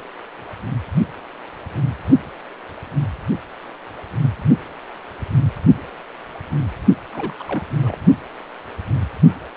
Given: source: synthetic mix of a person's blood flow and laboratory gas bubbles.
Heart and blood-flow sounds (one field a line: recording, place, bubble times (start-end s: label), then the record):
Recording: Doppler ultrasound of blood flow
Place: precordium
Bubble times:
7.13-7.44 s: bubbles
7.48-7.63 s: bubbles
7.81-7.96 s: bubbles
From the record:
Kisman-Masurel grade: 211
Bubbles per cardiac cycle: several, 3 to 8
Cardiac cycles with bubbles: 1 to 10%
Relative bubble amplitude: barely perceptible (0.100 to 0.250)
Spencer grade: 1 (occasional bubble signal discernible with the cardiac motion signal, with majority of cardiac periods free of bubbles)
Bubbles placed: only in the low amplitude regions of the cardiac cycle